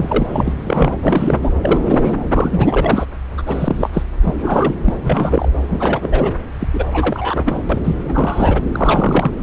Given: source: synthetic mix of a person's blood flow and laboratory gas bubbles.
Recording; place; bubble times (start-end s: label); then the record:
Doppler ultrasound of blood flow; subclavian vein
0.00-0.54 s: bubbles
0.59-0.96 s: bubbles
1.02-1.39 s: bubbles
1.42-1.51 s: bubbles
1.62-2.19 s: bubbles
2.33-3.06 s: bubbles
3.38-3.42 s: bubbles
3.46-3.90 s: bubbles
3.93-4.03 s: bubbles
4.22-4.75 s: bubbles
4.83-4.94 s: bubbles
5.03-5.49 s: bubbles
5.68-6.36 s: bubbles
6.60-6.68 s: bubbles
6.74-6.85 s: bubbles
6.93-7.58 s: bubbles
7.69-7.80 s: bubbles
7.84-7.95 s: bubbles
8.08-8.62 s: bubbles
8.72-9.31 s: bubbles
From the record:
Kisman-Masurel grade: 343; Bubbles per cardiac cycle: rolling drumbeat, 9 or more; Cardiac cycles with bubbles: 100%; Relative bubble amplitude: loud (0.450 to 0.775); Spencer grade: 3 (all of the cardiac periods contain showers or single bubble signals, but not dominating or overriding the cardiac motion signals); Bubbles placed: anywhere in the cardiac cycle